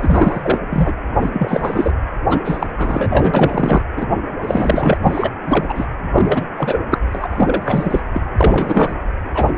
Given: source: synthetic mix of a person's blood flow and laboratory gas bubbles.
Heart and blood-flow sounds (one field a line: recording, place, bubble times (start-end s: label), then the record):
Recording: Doppler ultrasound of blood flow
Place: precordium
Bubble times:
0.00-0.58 s: bubbles
0.70-0.94 s: bubbles
1.21-1.30 s: bubbles
1.33-1.92 s: bubbles
2.29-2.40 s: bubbles
2.44-2.67 s: bubbles
2.77-3.81 s: bubbles
3.97-4.07 s: bubbles
4.41-4.98 s: bubbles
5.03-5.32 s: bubbles
5.43-5.85 s: bubbles
6.15-6.46 s: bubbles
6.57-6.80 s: bubbles
6.91-6.98 s: bubbles
7.12-8.00 s: bubbles
8.13-8.21 s: bubbles
8.38-8.93 s: bubbles
9.34-9.52 s: bubbles
From the record:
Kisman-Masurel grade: 343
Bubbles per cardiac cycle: rolling drumbeat, 9 or more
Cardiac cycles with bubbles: 100%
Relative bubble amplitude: loud (0.450 to 0.775)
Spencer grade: 3 (all of the cardiac periods contain showers or single bubble signals, but not dominating or overriding the cardiac motion signals)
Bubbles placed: anywhere in the cardiac cycle